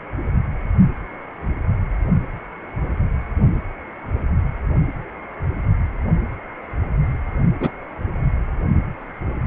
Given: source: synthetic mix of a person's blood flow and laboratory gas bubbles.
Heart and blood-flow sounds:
Doppler ultrasound of blood flow; precordium
7.60-7.72 s: bubbles
From the record:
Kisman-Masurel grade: 112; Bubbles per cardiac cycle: 1 to 2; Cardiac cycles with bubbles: 1 to 10%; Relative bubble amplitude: moderate (0.250 to 0.450); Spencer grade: 1 (occasional bubble signal discernible with the cardiac motion signal, with majority of cardiac periods free of bubbles); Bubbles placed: only in the low amplitude regions of the cardiac cycle

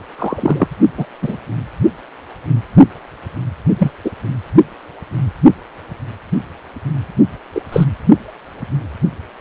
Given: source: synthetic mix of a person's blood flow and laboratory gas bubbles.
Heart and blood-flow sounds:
Doppler ultrasound of blood flow; precordium
0.18-0.68 s: bubbles
0.97-1.06 s: bubbles
1.22-1.37 s: bubbles
3.79-3.91 s: bubbles
4.04-4.11 s: bubbles
7.54-7.61 s: bubbles
7.72-7.84 s: bubbles
From the record:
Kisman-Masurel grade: 123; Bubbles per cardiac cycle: 1 to 2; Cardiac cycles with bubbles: 10 to 50%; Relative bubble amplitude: loud (0.450 to 0.775); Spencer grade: 2 (many but less than half of the cardiac periods contain bubble signals, singularly or in groups); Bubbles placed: anywhere in the cardiac cycle

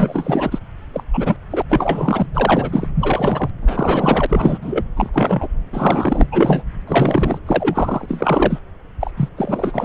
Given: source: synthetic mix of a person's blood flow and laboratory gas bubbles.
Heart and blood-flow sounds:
Doppler ultrasound of blood flow; subclavian vein
0.00-0.59 s: bubbles
0.93-1.03 s: bubbles
1.13-1.36 s: bubbles
1.50-1.62 s: bubbles
1.69-2.26 s: bubbles
2.34-2.88 s: bubbles
2.95-3.50 s: bubbles
3.62-4.26 s: bubbles
4.29-4.58 s: bubbles
4.61-4.85 s: bubbles
4.96-5.10 s: bubbles
5.13-5.47 s: bubbles
5.73-6.26 s: bubbles
6.31-6.63 s: bubbles
6.87-7.38 s: bubbles
7.46-8.59 s: bubbles
9.01-9.11 s: bubbles
9.17-9.29 s: bubbles
9.37-9.85 s: bubbles
From the record:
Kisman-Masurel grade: 343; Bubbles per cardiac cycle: rolling drumbeat, 9 or more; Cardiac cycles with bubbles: 100%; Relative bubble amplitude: loud (0.450 to 0.775); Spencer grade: 3 (all of the cardiac periods contain showers or single bubble signals, but not dominating or overriding the cardiac motion signals); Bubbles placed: anywhere in the cardiac cycle

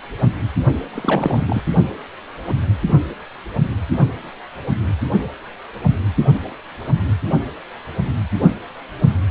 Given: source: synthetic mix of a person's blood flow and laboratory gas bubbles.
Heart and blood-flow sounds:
Doppler ultrasound of blood flow; precordium
0.94-1.61 s: bubbles
From the record:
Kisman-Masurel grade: 212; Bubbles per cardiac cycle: several, 3 to 8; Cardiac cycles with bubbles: 1 to 10%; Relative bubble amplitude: moderate (0.250 to 0.450); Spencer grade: 1 (occasional bubble signal discernible with the cardiac motion signal, with majority of cardiac periods free of bubbles); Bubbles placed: only in the low amplitude regions of the cardiac cycle

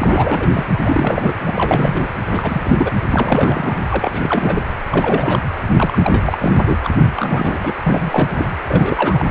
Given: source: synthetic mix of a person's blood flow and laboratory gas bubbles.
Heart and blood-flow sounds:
Doppler ultrasound of blood flow; precordium
0.00-0.49 s: bubbles
0.53-0.65 s: bubbles
0.84-1.33 s: bubbles
1.45-2.09 s: bubbles
2.26-2.92 s: bubbles
3.10-3.79 s: bubbles
3.90-4.62 s: bubbles
4.91-5.41 s: bubbles
5.76-5.98 s: bubbles
6.02-6.52 s: bubbles
6.67-6.79 s: bubbles
6.83-6.91 s: bubbles
7.00-7.12 s: bubbles
7.14-7.58 s: bubbles
7.62-7.72 s: bubbles
7.82-8.51 s: bubbles
8.68-9.25 s: bubbles
9.29-9.31 s: bubbles
From the record:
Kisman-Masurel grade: 342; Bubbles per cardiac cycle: rolling drumbeat, 9 or more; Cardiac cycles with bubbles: 100%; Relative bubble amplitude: moderate (0.250 to 0.450); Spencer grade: 3 (all of the cardiac periods contain showers or single bubble signals, but not dominating or overriding the cardiac motion signals); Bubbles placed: anywhere in the cardiac cycle

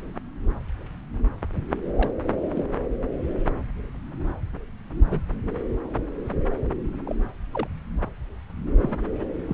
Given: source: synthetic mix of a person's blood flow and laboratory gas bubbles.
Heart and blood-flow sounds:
Doppler ultrasound of blood flow; subclavian vein
1.96-2.10 s: bubbles
2.55-2.64 s: bubbles
5.04-5.21 s: bubbles
7.04-7.16 s: bubbles
7.54-7.68 s: bubbles
8.82-8.95 s: bubbles
9.48-9.54 s: bubbles
From the record:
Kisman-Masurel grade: 121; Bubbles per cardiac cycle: 1 to 2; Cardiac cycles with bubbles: 10 to 50%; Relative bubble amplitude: barely perceptible (0.100 to 0.250); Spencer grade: 2 (many but less than half of the cardiac periods contain bubble signals, singularly or in groups); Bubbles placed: anywhere in the cardiac cycle

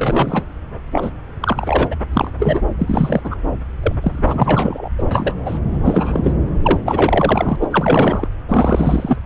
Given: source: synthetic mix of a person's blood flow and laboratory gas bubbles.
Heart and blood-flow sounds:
Doppler ultrasound of blood flow; subclavian vein
0.00-0.43 s: bubbles
0.92-1.10 s: bubbles
1.40-1.88 s: bubbles
1.91-1.96 s: bubbles
2.13-2.31 s: bubbles
2.39-2.62 s: bubbles
2.79-3.35 s: bubbles
3.82-3.95 s: bubbles
4.01-4.89 s: bubbles
4.98-5.03 s: bubbles
5.11-5.36 s: bubbles
5.45-5.59 s: bubbles
5.73-5.81 s: bubbles
5.84-6.32 s: bubbles
6.63-6.79 s: bubbles
6.85-7.56 s: bubbles
7.61-7.67 s: bubbles
7.71-8.28 s: bubbles
8.48-9.17 s: bubbles
From the record:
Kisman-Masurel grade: 343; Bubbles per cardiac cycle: rolling drumbeat, 9 or more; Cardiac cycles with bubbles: 100%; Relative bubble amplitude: loud (0.450 to 0.775); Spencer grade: 3 (all of the cardiac periods contain showers or single bubble signals, but not dominating or overriding the cardiac motion signals); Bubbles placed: anywhere in the cardiac cycle

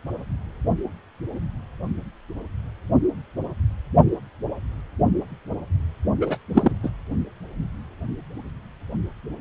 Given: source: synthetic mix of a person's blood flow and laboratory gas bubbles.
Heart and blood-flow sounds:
Doppler ultrasound of blood flow; precordium
6.21-6.37 s: bubbles
6.54-6.74 s: bubbles
6.83-6.89 s: bubbles
From the record:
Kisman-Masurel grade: 212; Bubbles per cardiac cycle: several, 3 to 8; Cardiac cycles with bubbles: 1 to 10%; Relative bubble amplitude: moderate (0.250 to 0.450); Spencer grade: 1 (occasional bubble signal discernible with the cardiac motion signal, with majority of cardiac periods free of bubbles); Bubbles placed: only in the low amplitude regions of the cardiac cycle

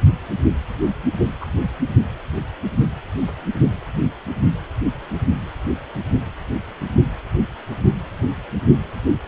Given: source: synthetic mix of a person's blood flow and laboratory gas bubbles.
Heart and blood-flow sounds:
Doppler ultrasound of blood flow; precordium
1.40-1.46 s: bubbles
From the record:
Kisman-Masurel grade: 112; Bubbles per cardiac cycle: 1 to 2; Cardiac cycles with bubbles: 1 to 10%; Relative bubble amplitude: moderate (0.250 to 0.450); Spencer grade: 1 (occasional bubble signal discernible with the cardiac motion signal, with majority of cardiac periods free of bubbles); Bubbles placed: only in the low amplitude regions of the cardiac cycle

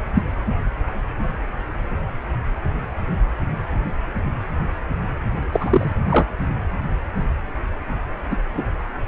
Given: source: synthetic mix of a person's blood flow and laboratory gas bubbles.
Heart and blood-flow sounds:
Doppler ultrasound of blood flow; precordium
0.15-0.22 s: bubbles
5.52-5.92 s: bubbles
6.10-6.25 s: bubbles
8.31-8.37 s: bubbles
8.54-8.64 s: bubbles
From the record:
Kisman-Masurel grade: 222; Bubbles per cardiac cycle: several, 3 to 8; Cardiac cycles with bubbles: 10 to 50%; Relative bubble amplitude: moderate (0.250 to 0.450); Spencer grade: 2 (many but less than half of the cardiac periods contain bubble signals, singularly or in groups); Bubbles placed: only in the low amplitude regions of the cardiac cycle

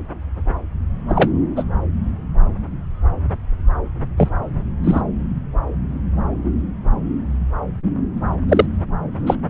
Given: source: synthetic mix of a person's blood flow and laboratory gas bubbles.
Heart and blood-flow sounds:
Doppler ultrasound of blood flow; subclavian vein
1.08-1.29 s: bubbles
1.56-1.63 s: bubbles
4.17-4.29 s: bubbles
4.84-5.00 s: bubbles
8.48-8.66 s: bubbles
9.26-9.37 s: bubbles
From the record:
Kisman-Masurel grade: 123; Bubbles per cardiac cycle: 1 to 2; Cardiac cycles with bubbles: 10 to 50%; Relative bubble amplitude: loud (0.450 to 0.775); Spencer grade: 2 (many but less than half of the cardiac periods contain bubble signals, singularly or in groups); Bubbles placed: anywhere in the cardiac cycle

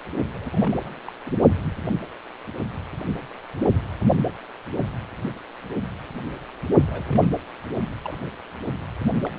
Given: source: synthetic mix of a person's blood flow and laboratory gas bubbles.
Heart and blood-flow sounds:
Doppler ultrasound of blood flow; precordium
0.34-0.50 s: bubbles
0.52-1.00 s: bubbles
1.08-1.11 s: bubbles
1.26-1.31 s: bubbles
6.86-7.29 s: bubbles
8.04-8.16 s: bubbles
8.21-8.30 s: bubbles
9.09-9.39 s: bubbles
From the record:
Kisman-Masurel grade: 221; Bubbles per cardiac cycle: several, 3 to 8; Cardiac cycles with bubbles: 10 to 50%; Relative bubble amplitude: barely perceptible (0.100 to 0.250); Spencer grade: 2 (many but less than half of the cardiac periods contain bubble signals, singularly or in groups); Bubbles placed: only in the low amplitude regions of the cardiac cycle

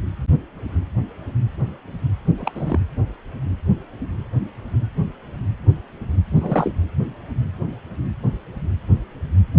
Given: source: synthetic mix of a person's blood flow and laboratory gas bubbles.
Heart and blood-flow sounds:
Doppler ultrasound of blood flow; precordium
2.37-2.80 s: bubbles
6.35-6.71 s: bubbles
From the record:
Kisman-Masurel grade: 212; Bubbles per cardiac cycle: several, 3 to 8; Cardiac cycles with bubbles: 1 to 10%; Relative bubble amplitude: moderate (0.250 to 0.450); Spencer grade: 1 (occasional bubble signal discernible with the cardiac motion signal, with majority of cardiac periods free of bubbles); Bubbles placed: anywhere in the cardiac cycle

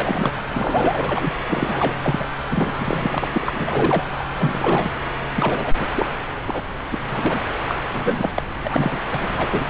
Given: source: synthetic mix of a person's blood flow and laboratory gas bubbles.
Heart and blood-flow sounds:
Doppler ultrasound of blood flow; subclavian vein
0.00-0.31 s: bubbles
0.49-1.30 s: bubbles
1.49-1.95 s: bubbles
2.02-2.27 s: bubbles
2.50-3.29 s: bubbles
3.32-4.04 s: bubbles
4.17-4.25 s: bubbles
4.37-4.91 s: bubbles
5.36-5.74 s: bubbles
5.79-5.87 s: bubbles
5.95-6.07 s: bubbles
6.46-6.62 s: bubbles
6.91-6.99 s: bubbles
7.08-7.42 s: bubbles
7.67-7.75 s: bubbles
7.90-8.30 s: bubbles
8.37-8.42 s: bubbles
8.63-8.99 s: bubbles
9.12-9.70 s: bubbles
From the record:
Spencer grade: 3 (all of the cardiac periods contain showers or single bubble signals, but not dominating or overriding the cardiac motion signals); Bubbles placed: anywhere in the cardiac cycle

